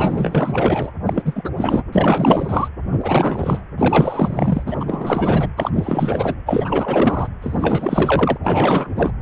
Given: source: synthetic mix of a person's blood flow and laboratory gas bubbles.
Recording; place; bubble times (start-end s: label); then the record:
Doppler ultrasound of blood flow; precordium
0.00-0.91 s: bubbles
1.05-1.49 s: bubbles
1.56-1.83 s: bubbles
1.92-2.68 s: bubbles
2.91-3.61 s: bubbles
3.77-4.64 s: bubbles
4.66-5.48 s: bubbles
5.57-6.35 s: bubbles
6.46-7.29 s: bubbles
7.41-8.38 s: bubbles
8.42-9.13 s: bubbles
From the record:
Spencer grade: 4 (maximum detectable bubble signal sounding continuously throughout systole and diastole of every cardiac period, and overriding the amplitude of the normal cardiac signals); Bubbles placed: anywhere in the cardiac cycle